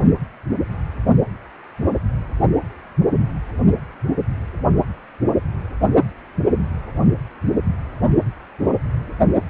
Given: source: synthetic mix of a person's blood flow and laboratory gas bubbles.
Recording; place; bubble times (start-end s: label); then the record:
Doppler ultrasound of blood flow; precordium
no bubbles
From the record:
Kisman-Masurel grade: 000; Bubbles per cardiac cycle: 0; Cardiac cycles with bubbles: 0%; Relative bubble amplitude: no bubbles discernible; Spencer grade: 0 (complete lack of bubble signals)